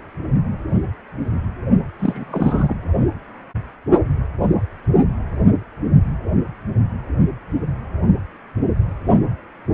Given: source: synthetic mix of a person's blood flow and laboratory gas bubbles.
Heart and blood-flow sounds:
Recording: Doppler ultrasound of blood flow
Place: precordium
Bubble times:
1.99-2.75 s: bubbles
From the record:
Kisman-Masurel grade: 212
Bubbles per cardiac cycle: several, 3 to 8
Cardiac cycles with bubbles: 1 to 10%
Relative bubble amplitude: moderate (0.250 to 0.450)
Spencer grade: 1 (occasional bubble signal discernible with the cardiac motion signal, with majority of cardiac periods free of bubbles)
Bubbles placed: only in the low amplitude regions of the cardiac cycle

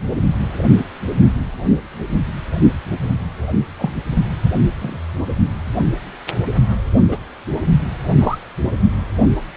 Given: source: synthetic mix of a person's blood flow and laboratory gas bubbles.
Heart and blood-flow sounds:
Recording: Doppler ultrasound of blood flow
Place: precordium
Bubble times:
3.77-3.93 s: bubbles
4.81-5.00 s: bubbles
7.08-7.17 s: bubbles
8.19-8.38 s: bubbles
From the record:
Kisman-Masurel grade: 122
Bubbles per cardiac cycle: 1 to 2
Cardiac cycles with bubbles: 10 to 50%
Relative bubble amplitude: moderate (0.250 to 0.450)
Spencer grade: 2 (many but less than half of the cardiac periods contain bubble signals, singularly or in groups)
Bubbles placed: anywhere in the cardiac cycle

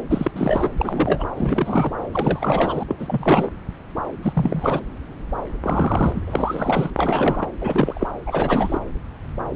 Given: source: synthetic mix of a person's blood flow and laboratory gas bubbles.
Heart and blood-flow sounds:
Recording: Doppler ultrasound of blood flow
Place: subclavian vein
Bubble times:
0.10-0.31 s: bubbles
0.34-0.71 s: bubbles
0.78-1.28 s: bubbles
1.36-1.92 s: bubbles
2.11-2.83 s: bubbles
2.88-3.50 s: bubbles
4.23-4.79 s: bubbles
5.63-6.21 s: bubbles
6.27-6.91 s: bubbles
6.97-7.50 s: bubbles
7.61-8.06 s: bubbles
8.27-8.79 s: bubbles
From the record:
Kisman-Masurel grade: 332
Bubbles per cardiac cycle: rolling drumbeat, 9 or more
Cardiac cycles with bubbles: 50 to 99%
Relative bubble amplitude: moderate (0.250 to 0.450)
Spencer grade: 3 (all of the cardiac periods contain showers or single bubble signals, but not dominating or overriding the cardiac motion signals)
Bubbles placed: anywhere in the cardiac cycle

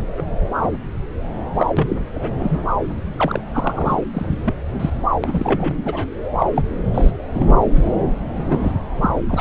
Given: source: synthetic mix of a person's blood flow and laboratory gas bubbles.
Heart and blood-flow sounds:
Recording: Doppler ultrasound of blood flow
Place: subclavian vein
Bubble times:
0.17-0.22 s: bubbles
0.52-0.78 s: bubbles
1.54-1.67 s: bubbles
1.77-1.96 s: bubbles
2.14-2.31 s: bubbles
2.39-2.64 s: bubbles
3.17-3.41 s: bubbles
3.52-4.03 s: bubbles
4.13-4.38 s: bubbles
4.45-4.54 s: bubbles
4.79-4.90 s: bubbles
5.23-6.05 s: bubbles
6.38-6.46 s: bubbles
6.55-6.63 s: bubbles
6.94-7.12 s: bubbles
7.29-7.58 s: bubbles
7.74-7.88 s: bubbles
8.36-8.71 s: bubbles
9.01-9.11 s: bubbles
9.29-9.41 s: bubbles
From the record:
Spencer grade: 3 (all of the cardiac periods contain showers or single bubble signals, but not dominating or overriding the cardiac motion signals)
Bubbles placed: anywhere in the cardiac cycle

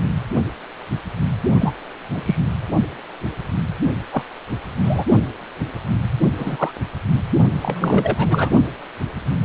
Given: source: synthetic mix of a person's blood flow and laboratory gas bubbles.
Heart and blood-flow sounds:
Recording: Doppler ultrasound of blood flow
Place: precordium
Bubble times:
1.60-1.72 s: bubbles
2.13-2.36 s: bubbles
4.11-4.22 s: bubbles
4.83-5.05 s: bubbles
6.38-6.75 s: bubbles
7.62-8.51 s: bubbles
From the record:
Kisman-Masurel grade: 233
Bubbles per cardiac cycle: several, 3 to 8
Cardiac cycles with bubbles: 50 to 99%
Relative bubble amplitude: loud (0.450 to 0.775)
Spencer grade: 3 (all of the cardiac periods contain showers or single bubble signals, but not dominating or overriding the cardiac motion signals)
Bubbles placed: only in the low amplitude regions of the cardiac cycle

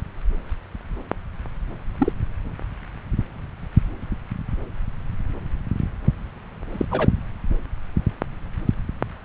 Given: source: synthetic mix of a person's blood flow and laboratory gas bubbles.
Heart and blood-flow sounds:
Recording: Doppler ultrasound of blood flow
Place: subclavian vein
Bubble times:
1.99-2.12 s: bubbles
6.72-6.85 s: bubbles
6.90-7.09 s: bubbles
From the record:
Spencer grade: 1 (occasional bubble signal discernible with the cardiac motion signal, with majority of cardiac periods free of bubbles)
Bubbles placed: anywhere in the cardiac cycle

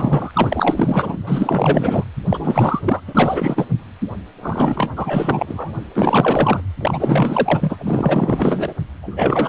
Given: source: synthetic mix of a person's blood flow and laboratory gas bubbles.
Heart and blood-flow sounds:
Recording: Doppler ultrasound of blood flow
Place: precordium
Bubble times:
0.00-1.19 s: bubbles
1.27-2.04 s: bubbles
2.29-2.81 s: bubbles
2.83-3.00 s: bubbles
3.06-3.66 s: bubbles
4.42-4.90 s: bubbles
4.94-5.74 s: bubbles
5.96-6.61 s: bubbles
6.80-8.73 s: bubbles
9.01-9.49 s: bubbles
From the record:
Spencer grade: 4 (maximum detectable bubble signal sounding continuously throughout systole and diastole of every cardiac period, and overriding the amplitude of the normal cardiac signals)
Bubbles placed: anywhere in the cardiac cycle

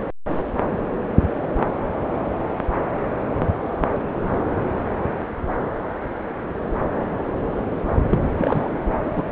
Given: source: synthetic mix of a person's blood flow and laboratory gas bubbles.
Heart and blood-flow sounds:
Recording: Doppler ultrasound of blood flow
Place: subclavian vein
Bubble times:
8.10-8.70 s: bubbles
9.04-9.29 s: bubbles
From the record:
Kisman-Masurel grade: 213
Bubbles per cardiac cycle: several, 3 to 8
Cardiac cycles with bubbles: 1 to 10%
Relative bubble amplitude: loud (0.450 to 0.775)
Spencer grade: 1 (occasional bubble signal discernible with the cardiac motion signal, with majority of cardiac periods free of bubbles)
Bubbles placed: anywhere in the cardiac cycle

